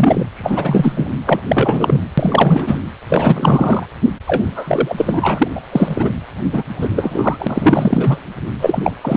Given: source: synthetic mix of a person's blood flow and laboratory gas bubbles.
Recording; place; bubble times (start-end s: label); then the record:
Doppler ultrasound of blood flow; precordium
0.00-0.24 s: bubbles
0.36-1.09 s: bubbles
1.27-1.41 s: bubbles
1.48-2.02 s: bubbles
2.17-2.79 s: bubbles
3.08-3.85 s: bubbles
4.27-5.47 s: bubbles
5.55-5.60 s: bubbles
5.71-6.12 s: bubbles
6.52-6.63 s: bubbles
6.69-8.24 s: bubbles
8.61-8.92 s: bubbles
9.02-9.16 s: bubbles
From the record:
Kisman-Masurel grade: 343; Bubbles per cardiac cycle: rolling drumbeat, 9 or more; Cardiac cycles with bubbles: 100%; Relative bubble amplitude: loud (0.450 to 0.775); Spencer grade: 3 (all of the cardiac periods contain showers or single bubble signals, but not dominating or overriding the cardiac motion signals); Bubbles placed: anywhere in the cardiac cycle